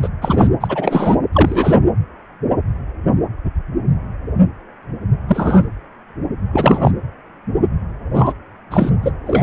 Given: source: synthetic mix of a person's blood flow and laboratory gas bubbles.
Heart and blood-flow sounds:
Doppler ultrasound of blood flow; precordium
0.00-0.09 s: bubbles
0.22-0.47 s: bubbles
0.60-1.17 s: bubbles
1.33-1.77 s: bubbles
5.28-5.70 s: bubbles
6.53-6.91 s: bubbles
8.13-8.32 s: bubbles
8.71-8.90 s: bubbles
9.02-9.12 s: bubbles
9.26-9.43 s: bubbles
From the record:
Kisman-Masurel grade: 223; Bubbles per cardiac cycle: several, 3 to 8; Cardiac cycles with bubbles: 10 to 50%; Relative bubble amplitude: loud (0.450 to 0.775); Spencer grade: 2 (many but less than half of the cardiac periods contain bubble signals, singularly or in groups); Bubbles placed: anywhere in the cardiac cycle

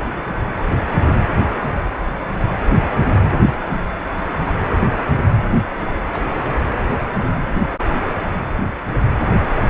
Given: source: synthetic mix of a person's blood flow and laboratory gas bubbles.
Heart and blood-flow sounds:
Doppler ultrasound of blood flow; precordium
5.79-5.92 s: bubbles
6.12-6.25 s: bubbles
6.31-6.48 s: bubbles
From the record:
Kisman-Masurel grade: 121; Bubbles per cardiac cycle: 1 to 2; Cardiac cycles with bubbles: 10 to 50%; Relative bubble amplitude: barely perceptible (0.100 to 0.250); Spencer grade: 2 (many but less than half of the cardiac periods contain bubble signals, singularly or in groups); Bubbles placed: anywhere in the cardiac cycle

